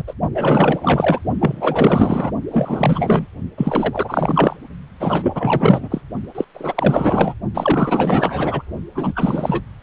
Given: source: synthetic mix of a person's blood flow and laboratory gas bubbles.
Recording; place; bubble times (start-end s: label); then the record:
Doppler ultrasound of blood flow; precordium
0.00-0.03 s: bubbles
0.07-0.14 s: bubbles
0.33-1.19 s: bubbles
1.40-2.31 s: bubbles
2.52-3.26 s: bubbles
3.57-4.56 s: bubbles
5.00-6.01 s: bubbles
6.34-6.45 s: bubbles
6.54-7.34 s: bubbles
7.54-8.62 s: bubbles
8.95-9.62 s: bubbles
From the record:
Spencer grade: 4 (maximum detectable bubble signal sounding continuously throughout systole and diastole of every cardiac period, and overriding the amplitude of the normal cardiac signals); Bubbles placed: only in the low amplitude regions of the cardiac cycle